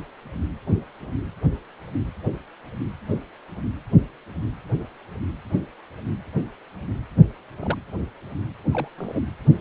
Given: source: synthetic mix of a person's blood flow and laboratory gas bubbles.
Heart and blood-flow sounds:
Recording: Doppler ultrasound of blood flow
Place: precordium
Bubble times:
7.61-7.76 s: bubbles
8.71-8.88 s: bubbles
8.97-9.20 s: bubbles
From the record:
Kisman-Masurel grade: 121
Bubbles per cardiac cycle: 1 to 2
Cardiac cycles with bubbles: 10 to 50%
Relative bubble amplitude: barely perceptible (0.100 to 0.250)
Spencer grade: 2 (many but less than half of the cardiac periods contain bubble signals, singularly or in groups)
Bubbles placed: anywhere in the cardiac cycle

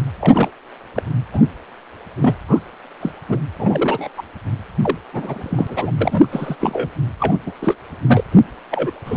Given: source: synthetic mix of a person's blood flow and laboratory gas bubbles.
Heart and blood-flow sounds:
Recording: Doppler ultrasound of blood flow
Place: precordium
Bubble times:
0.19-0.49 s: bubbles
0.95-1.03 s: bubbles
1.33-1.42 s: bubbles
2.21-2.36 s: bubbles
2.47-2.60 s: bubbles
3.00-3.11 s: bubbles
3.28-3.39 s: bubbles
3.58-4.09 s: bubbles
4.17-4.22 s: bubbles
4.81-4.98 s: bubbles
5.12-5.92 s: bubbles
6.00-6.26 s: bubbles
6.31-6.55 s: bubbles
6.60-6.90 s: bubbles
7.18-7.38 s: bubbles
7.46-7.52 s: bubbles
7.61-7.75 s: bubbles
8.07-8.24 s: bubbles
8.31-8.41 s: bubbles
8.71-8.92 s: bubbles
9.06-9.16 s: bubbles
From the record:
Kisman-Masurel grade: 243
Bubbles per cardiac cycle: several, 3 to 8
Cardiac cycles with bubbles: 100%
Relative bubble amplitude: loud (0.450 to 0.775)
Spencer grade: 3 (all of the cardiac periods contain showers or single bubble signals, but not dominating or overriding the cardiac motion signals)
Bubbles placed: anywhere in the cardiac cycle

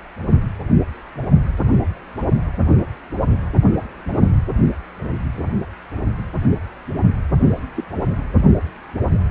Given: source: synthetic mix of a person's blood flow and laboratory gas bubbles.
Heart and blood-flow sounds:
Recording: Doppler ultrasound of blood flow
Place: precordium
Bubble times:
7.76-7.84 s: bubbles
From the record:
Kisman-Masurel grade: 111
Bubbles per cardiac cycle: 1 to 2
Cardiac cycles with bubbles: 1 to 10%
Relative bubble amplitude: barely perceptible (0.100 to 0.250)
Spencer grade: 1 (occasional bubble signal discernible with the cardiac motion signal, with majority of cardiac periods free of bubbles)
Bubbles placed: only in the low amplitude regions of the cardiac cycle

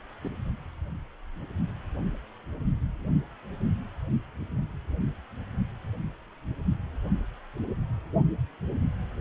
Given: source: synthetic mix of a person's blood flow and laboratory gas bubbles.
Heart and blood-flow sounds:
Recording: Doppler ultrasound of blood flow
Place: precordium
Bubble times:
0.24-0.28 s: bubbles
From the record:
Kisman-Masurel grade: 111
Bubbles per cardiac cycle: 1 to 2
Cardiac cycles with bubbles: 1 to 10%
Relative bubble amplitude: barely perceptible (0.100 to 0.250)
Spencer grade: 1 (occasional bubble signal discernible with the cardiac motion signal, with majority of cardiac periods free of bubbles)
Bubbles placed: only in the low amplitude regions of the cardiac cycle

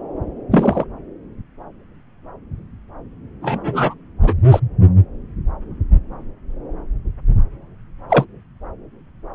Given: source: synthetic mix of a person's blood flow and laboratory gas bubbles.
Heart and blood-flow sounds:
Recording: Doppler ultrasound of blood flow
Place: subclavian vein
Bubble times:
0.51-0.84 s: bubbles
3.42-3.94 s: bubbles
4.22-4.33 s: bubbles
4.50-4.60 s: bubbles
8.10-8.25 s: bubbles
From the record:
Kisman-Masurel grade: 123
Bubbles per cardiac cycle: 1 to 2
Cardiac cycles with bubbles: 10 to 50%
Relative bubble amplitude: loud (0.450 to 0.775)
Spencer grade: 2 (many but less than half of the cardiac periods contain bubble signals, singularly or in groups)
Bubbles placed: anywhere in the cardiac cycle

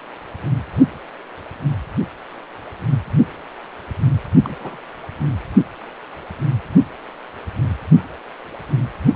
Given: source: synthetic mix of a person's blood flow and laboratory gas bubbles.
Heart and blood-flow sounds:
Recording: Doppler ultrasound of blood flow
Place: precordium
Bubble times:
4.44-4.56 s: bubbles
4.59-4.80 s: bubbles
From the record:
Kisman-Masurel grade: 211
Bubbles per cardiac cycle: several, 3 to 8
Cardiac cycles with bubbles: 1 to 10%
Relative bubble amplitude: barely perceptible (0.100 to 0.250)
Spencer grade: 1 (occasional bubble signal discernible with the cardiac motion signal, with majority of cardiac periods free of bubbles)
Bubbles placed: only in the low amplitude regions of the cardiac cycle

